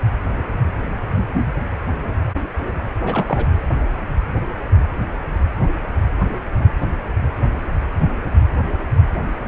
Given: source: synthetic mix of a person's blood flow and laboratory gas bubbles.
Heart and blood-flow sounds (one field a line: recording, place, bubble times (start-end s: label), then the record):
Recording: Doppler ultrasound of blood flow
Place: precordium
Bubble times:
3.04-3.49 s: bubbles
From the record:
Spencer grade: 1 (occasional bubble signal discernible with the cardiac motion signal, with majority of cardiac periods free of bubbles)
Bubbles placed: anywhere in the cardiac cycle